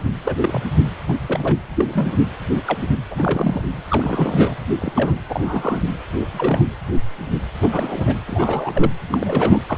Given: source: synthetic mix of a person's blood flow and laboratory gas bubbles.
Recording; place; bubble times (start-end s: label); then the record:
Doppler ultrasound of blood flow; precordium
0.24-0.35 s: bubbles
0.40-0.64 s: bubbles
1.06-1.18 s: bubbles
1.22-1.56 s: bubbles
1.75-2.27 s: bubbles
2.50-2.61 s: bubbles
2.66-2.77 s: bubbles
2.81-2.88 s: bubbles
3.10-3.62 s: bubbles
3.90-4.54 s: bubbles
4.79-5.14 s: bubbles
5.29-5.80 s: bubbles
6.12-6.66 s: bubbles
7.60-8.18 s: bubbles
8.28-8.92 s: bubbles
9.12-9.62 s: bubbles
9.69-9.77 s: bubbles
From the record:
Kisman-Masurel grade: 232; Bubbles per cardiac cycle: several, 3 to 8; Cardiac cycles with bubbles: 50 to 99%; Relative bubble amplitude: moderate (0.250 to 0.450); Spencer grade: 3 (all of the cardiac periods contain showers or single bubble signals, but not dominating or overriding the cardiac motion signals); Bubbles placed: anywhere in the cardiac cycle